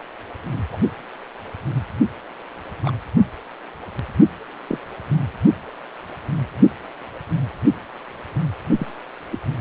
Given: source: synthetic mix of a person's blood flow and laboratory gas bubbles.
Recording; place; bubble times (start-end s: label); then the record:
Doppler ultrasound of blood flow; precordium
0.72-0.77 s: bubbles
2.82-2.91 s: bubbles
4.69-4.79 s: bubbles
8.78-8.87 s: bubbles
9.31-9.39 s: bubbles
From the record:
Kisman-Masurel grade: 122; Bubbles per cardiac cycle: 1 to 2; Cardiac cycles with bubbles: 10 to 50%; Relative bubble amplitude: moderate (0.250 to 0.450); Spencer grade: 2 (many but less than half of the cardiac periods contain bubble signals, singularly or in groups); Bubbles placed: anywhere in the cardiac cycle